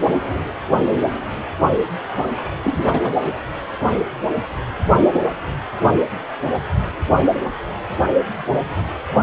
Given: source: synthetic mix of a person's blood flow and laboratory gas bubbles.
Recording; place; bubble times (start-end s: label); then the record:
Doppler ultrasound of blood flow; precordium
2.16-2.27 s: bubbles
2.62-3.16 s: bubbles
From the record:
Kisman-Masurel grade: 212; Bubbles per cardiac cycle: several, 3 to 8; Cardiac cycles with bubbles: 1 to 10%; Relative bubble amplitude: moderate (0.250 to 0.450); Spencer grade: 1 (occasional bubble signal discernible with the cardiac motion signal, with majority of cardiac periods free of bubbles); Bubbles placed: anywhere in the cardiac cycle